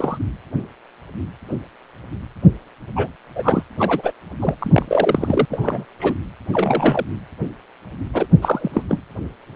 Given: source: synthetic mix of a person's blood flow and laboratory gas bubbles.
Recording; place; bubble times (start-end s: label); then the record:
Doppler ultrasound of blood flow; precordium
0.00-0.18 s: bubbles
2.96-3.07 s: bubbles
3.35-3.62 s: bubbles
3.79-4.12 s: bubbles
4.40-4.55 s: bubbles
4.58-5.46 s: bubbles
5.50-5.85 s: bubbles
5.99-6.15 s: bubbles
6.53-7.06 s: bubbles
8.13-8.26 s: bubbles
8.41-8.83 s: bubbles
8.89-8.99 s: bubbles
From the record:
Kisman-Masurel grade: 233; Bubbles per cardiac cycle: several, 3 to 8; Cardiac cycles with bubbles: 50 to 99%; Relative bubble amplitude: loud (0.450 to 0.775); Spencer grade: 3 (all of the cardiac periods contain showers or single bubble signals, but not dominating or overriding the cardiac motion signals); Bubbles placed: anywhere in the cardiac cycle